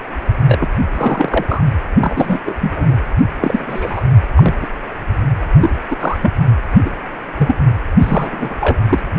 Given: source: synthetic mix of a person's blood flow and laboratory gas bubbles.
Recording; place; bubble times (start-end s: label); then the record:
Doppler ultrasound of blood flow; precordium
0.47-0.69 s: bubbles
0.97-1.45 s: bubbles
1.47-1.62 s: bubbles
2.00-2.38 s: bubbles
2.45-2.55 s: bubbles
2.60-2.98 s: bubbles
3.41-4.05 s: bubbles
4.36-4.55 s: bubbles
4.62-4.67 s: bubbles
5.54-5.70 s: bubbles
5.91-5.96 s: bubbles
6.00-6.17 s: bubbles
6.21-6.32 s: bubbles
6.84-6.92 s: bubbles
7.38-7.56 s: bubbles
8.02-8.55 s: bubbles
8.60-8.76 s: bubbles
8.86-8.99 s: bubbles
From the record:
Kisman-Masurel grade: 243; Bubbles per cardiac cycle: several, 3 to 8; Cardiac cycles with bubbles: 100%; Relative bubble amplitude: loud (0.450 to 0.775); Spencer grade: 3 (all of the cardiac periods contain showers or single bubble signals, but not dominating or overriding the cardiac motion signals); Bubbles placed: anywhere in the cardiac cycle